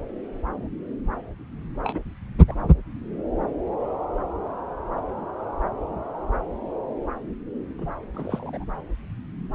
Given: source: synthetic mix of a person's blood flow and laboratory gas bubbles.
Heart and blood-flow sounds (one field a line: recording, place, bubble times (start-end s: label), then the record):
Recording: Doppler ultrasound of blood flow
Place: subclavian vein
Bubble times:
1.82-2.00 s: bubbles
2.48-2.55 s: bubbles
7.78-7.93 s: bubbles
8.13-8.64 s: bubbles
From the record:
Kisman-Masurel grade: 221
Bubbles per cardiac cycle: several, 3 to 8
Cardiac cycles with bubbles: 10 to 50%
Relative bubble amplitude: barely perceptible (0.100 to 0.250)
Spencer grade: 2 (many but less than half of the cardiac periods contain bubble signals, singularly or in groups)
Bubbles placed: anywhere in the cardiac cycle